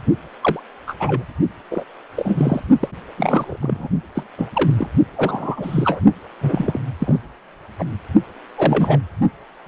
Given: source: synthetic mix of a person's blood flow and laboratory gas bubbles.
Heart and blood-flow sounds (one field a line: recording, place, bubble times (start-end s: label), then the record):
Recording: Doppler ultrasound of blood flow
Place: precordium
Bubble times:
0.41-0.60 s: bubbles
0.87-0.94 s: bubbles
0.99-1.23 s: bubbles
1.70-1.84 s: bubbles
2.16-2.61 s: bubbles
2.79-2.88 s: bubbles
3.17-3.57 s: bubbles
3.61-3.88 s: bubbles
4.15-4.24 s: bubbles
4.38-4.71 s: bubbles
4.78-4.88 s: bubbles
5.16-6.01 s: bubbles
6.41-6.80 s: bubbles
6.99-7.19 s: bubbles
7.78-7.85 s: bubbles
8.58-9.00 s: bubbles
9.66-9.68 s: bubbles
From the record:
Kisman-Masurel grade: 242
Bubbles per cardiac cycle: several, 3 to 8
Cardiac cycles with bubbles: 100%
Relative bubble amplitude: moderate (0.250 to 0.450)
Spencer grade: 3 (all of the cardiac periods contain showers or single bubble signals, but not dominating or overriding the cardiac motion signals)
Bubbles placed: only in the low amplitude regions of the cardiac cycle